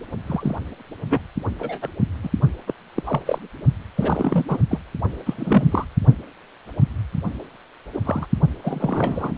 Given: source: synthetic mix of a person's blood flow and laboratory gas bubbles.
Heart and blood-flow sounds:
Doppler ultrasound of blood flow; precordium
0.27-0.56 s: bubbles
1.09-1.21 s: bubbles
1.59-1.89 s: bubbles
2.23-2.30 s: bubbles
2.66-2.74 s: bubbles
2.95-3.02 s: bubbles
3.06-3.20 s: bubbles
3.25-3.38 s: bubbles
3.96-4.46 s: bubbles
4.48-4.58 s: bubbles
4.70-4.79 s: bubbles
5.25-5.34 s: bubbles
5.37-5.85 s: bubbles
7.93-8.00 s: bubbles
8.05-8.26 s: bubbles
8.63-9.35 s: bubbles
From the record:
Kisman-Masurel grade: 232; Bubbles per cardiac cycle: several, 3 to 8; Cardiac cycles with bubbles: 50 to 99%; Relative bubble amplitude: moderate (0.250 to 0.450); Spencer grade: 3 (all of the cardiac periods contain showers or single bubble signals, but not dominating or overriding the cardiac motion signals); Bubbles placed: only in the low amplitude regions of the cardiac cycle

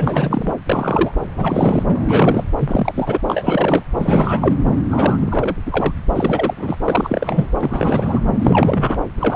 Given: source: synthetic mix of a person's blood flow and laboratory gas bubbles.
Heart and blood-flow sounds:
Doppler ultrasound of blood flow; subclavian vein
0.00-0.54 s: bubbles
0.69-1.12 s: bubbles
1.37-1.83 s: bubbles
1.88-2.44 s: bubbles
2.58-2.93 s: bubbles
2.95-3.19 s: bubbles
3.29-3.84 s: bubbles
3.99-4.57 s: bubbles
4.90-5.17 s: bubbles
5.20-5.57 s: bubbles
5.66-5.92 s: bubbles
6.15-6.54 s: bubbles
6.57-6.76 s: bubbles
6.84-7.47 s: bubbles
7.60-8.20 s: bubbles
8.38-9.00 s: bubbles
9.18-9.36 s: bubbles
From the record:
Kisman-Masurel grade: 342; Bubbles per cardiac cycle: rolling drumbeat, 9 or more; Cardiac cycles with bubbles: 100%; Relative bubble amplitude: moderate (0.250 to 0.450); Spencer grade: 3 (all of the cardiac periods contain showers or single bubble signals, but not dominating or overriding the cardiac motion signals); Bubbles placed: anywhere in the cardiac cycle

